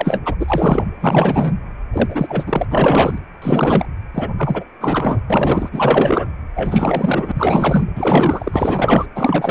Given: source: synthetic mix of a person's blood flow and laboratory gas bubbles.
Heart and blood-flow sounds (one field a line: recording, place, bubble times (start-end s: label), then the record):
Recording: Doppler ultrasound of blood flow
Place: precordium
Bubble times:
0.00-0.22 s: bubbles
0.25-0.36 s: bubbles
0.40-0.84 s: bubbles
1.00-1.54 s: bubbles
1.93-2.65 s: bubbles
2.70-3.18 s: bubbles
3.42-3.85 s: bubbles
4.14-4.29 s: bubbles
4.37-4.63 s: bubbles
4.80-5.20 s: bubbles
5.29-5.69 s: bubbles
5.72-6.29 s: bubbles
6.54-7.32 s: bubbles
7.34-7.85 s: bubbles
7.95-9.06 s: bubbles
9.15-9.51 s: bubbles
From the record:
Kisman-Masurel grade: 444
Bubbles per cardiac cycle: continuous sound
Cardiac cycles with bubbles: 100%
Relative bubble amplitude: maximal (0.775 to 0.999)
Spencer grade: 4 (maximum detectable bubble signal sounding continuously throughout systole and diastole of every cardiac period, and overriding the amplitude of the normal cardiac signals)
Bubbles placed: anywhere in the cardiac cycle